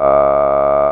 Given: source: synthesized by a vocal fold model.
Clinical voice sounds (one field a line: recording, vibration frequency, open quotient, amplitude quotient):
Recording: sustained vowel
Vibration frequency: 70 Hz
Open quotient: 0.1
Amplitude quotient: 1.2